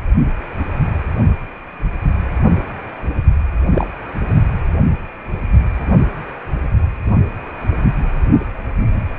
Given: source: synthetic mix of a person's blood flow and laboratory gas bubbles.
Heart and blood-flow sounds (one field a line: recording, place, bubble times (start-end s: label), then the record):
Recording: Doppler ultrasound of blood flow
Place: precordium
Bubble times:
3.73-3.87 s: bubbles
From the record:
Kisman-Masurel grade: 113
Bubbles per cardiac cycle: 1 to 2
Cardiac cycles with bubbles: 1 to 10%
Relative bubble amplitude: loud (0.450 to 0.775)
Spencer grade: 1 (occasional bubble signal discernible with the cardiac motion signal, with majority of cardiac periods free of bubbles)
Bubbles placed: only in the low amplitude regions of the cardiac cycle